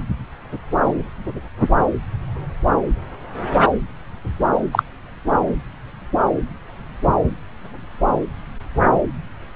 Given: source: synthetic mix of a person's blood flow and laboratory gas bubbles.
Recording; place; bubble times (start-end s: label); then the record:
Doppler ultrasound of blood flow; subclavian vein
4.72-4.83 s: bubbles
From the record:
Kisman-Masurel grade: 113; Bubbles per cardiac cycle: 1 to 2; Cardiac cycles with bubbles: 1 to 10%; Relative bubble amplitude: loud (0.450 to 0.775); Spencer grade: 1 (occasional bubble signal discernible with the cardiac motion signal, with majority of cardiac periods free of bubbles); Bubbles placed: anywhere in the cardiac cycle